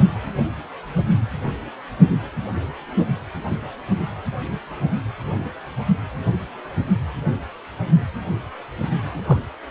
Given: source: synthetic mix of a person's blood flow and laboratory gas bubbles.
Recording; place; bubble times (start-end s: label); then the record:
Doppler ultrasound of blood flow; precordium
9.05-9.45 s: bubbles
From the record:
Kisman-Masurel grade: 121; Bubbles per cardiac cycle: 1 to 2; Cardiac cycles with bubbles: 10 to 50%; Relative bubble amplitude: barely perceptible (0.100 to 0.250); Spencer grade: 2 (many but less than half of the cardiac periods contain bubble signals, singularly or in groups); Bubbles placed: only in the low amplitude regions of the cardiac cycle